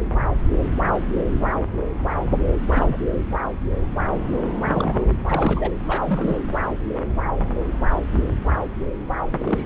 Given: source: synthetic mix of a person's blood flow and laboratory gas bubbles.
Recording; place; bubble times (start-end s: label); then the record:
Doppler ultrasound of blood flow; subclavian vein
2.68-2.97 s: bubbles
4.59-5.14 s: bubbles
5.25-5.71 s: bubbles
5.83-6.42 s: bubbles
9.39-9.66 s: bubbles
From the record:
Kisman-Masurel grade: 221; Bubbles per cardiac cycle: several, 3 to 8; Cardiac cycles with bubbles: 10 to 50%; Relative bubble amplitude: barely perceptible (0.100 to 0.250); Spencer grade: 2 (many but less than half of the cardiac periods contain bubble signals, singularly or in groups); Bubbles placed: anywhere in the cardiac cycle